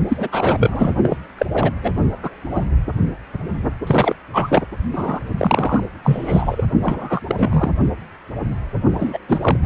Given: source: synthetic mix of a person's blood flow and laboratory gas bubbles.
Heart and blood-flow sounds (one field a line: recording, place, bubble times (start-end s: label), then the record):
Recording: Doppler ultrasound of blood flow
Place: precordium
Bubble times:
0.07-0.29 s: bubbles
0.32-0.94 s: bubbles
1.03-1.17 s: bubbles
1.38-1.46 s: bubbles
1.53-1.78 s: bubbles
1.82-1.91 s: bubbles
2.22-2.30 s: bubbles
2.50-2.65 s: bubbles
3.87-4.15 s: bubbles
4.33-4.62 s: bubbles
4.92-5.20 s: bubbles
5.38-5.83 s: bubbles
6.03-6.64 s: bubbles
6.82-7.20 s: bubbles
7.27-7.71 s: bubbles
8.93-9.19 s: bubbles
9.28-9.38 s: bubbles
9.41-9.56 s: bubbles
9.63-9.66 s: bubbles
From the record:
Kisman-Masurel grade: 333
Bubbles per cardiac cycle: rolling drumbeat, 9 or more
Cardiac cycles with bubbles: 50 to 99%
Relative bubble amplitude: loud (0.450 to 0.775)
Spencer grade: 3 (all of the cardiac periods contain showers or single bubble signals, but not dominating or overriding the cardiac motion signals)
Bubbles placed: only in the low amplitude regions of the cardiac cycle